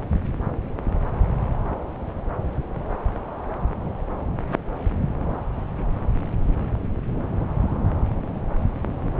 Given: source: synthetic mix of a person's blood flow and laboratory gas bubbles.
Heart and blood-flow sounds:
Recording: Doppler ultrasound of blood flow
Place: subclavian vein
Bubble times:
no bubbles
From the record:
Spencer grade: 0 (complete lack of bubble signals)

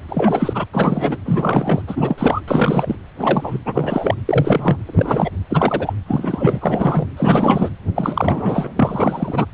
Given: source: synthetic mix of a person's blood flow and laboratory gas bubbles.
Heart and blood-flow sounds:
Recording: Doppler ultrasound of blood flow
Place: precordium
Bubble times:
0.09-0.65 s: bubbles
0.72-1.17 s: bubbles
1.25-1.81 s: bubbles
1.87-2.41 s: bubbles
2.48-2.96 s: bubbles
3.19-3.58 s: bubbles
3.65-4.15 s: bubbles
4.25-4.77 s: bubbles
4.85-5.30 s: bubbles
5.50-5.94 s: bubbles
6.08-7.07 s: bubbles
7.17-7.70 s: bubbles
7.95-8.72 s: bubbles
8.76-9.46 s: bubbles
From the record:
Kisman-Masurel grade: 333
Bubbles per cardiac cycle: rolling drumbeat, 9 or more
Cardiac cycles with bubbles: 50 to 99%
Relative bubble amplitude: loud (0.450 to 0.775)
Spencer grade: 3 (all of the cardiac periods contain showers or single bubble signals, but not dominating or overriding the cardiac motion signals)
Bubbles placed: anywhere in the cardiac cycle

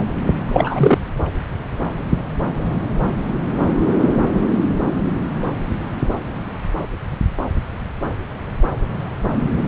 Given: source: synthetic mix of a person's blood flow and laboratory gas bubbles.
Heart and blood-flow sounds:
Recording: Doppler ultrasound of blood flow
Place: subclavian vein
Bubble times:
0.48-0.98 s: bubbles
From the record:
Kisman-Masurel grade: 213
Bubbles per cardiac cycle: several, 3 to 8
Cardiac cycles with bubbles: 1 to 10%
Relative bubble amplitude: loud (0.450 to 0.775)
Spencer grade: 1 (occasional bubble signal discernible with the cardiac motion signal, with majority of cardiac periods free of bubbles)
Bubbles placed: anywhere in the cardiac cycle

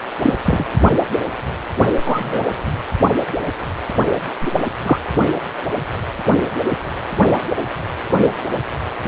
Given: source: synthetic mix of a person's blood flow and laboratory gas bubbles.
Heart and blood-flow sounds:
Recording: Doppler ultrasound of blood flow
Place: precordium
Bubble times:
0.18-0.33 s: bubbles
0.45-0.66 s: bubbles
2.04-2.42 s: bubbles
4.42-4.52 s: bubbles
4.83-4.99 s: bubbles
8.21-8.30 s: bubbles
From the record:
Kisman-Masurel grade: 123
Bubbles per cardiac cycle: 1 to 2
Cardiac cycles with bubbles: 10 to 50%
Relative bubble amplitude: loud (0.450 to 0.775)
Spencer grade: 2 (many but less than half of the cardiac periods contain bubble signals, singularly or in groups)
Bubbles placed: only in the low amplitude regions of the cardiac cycle

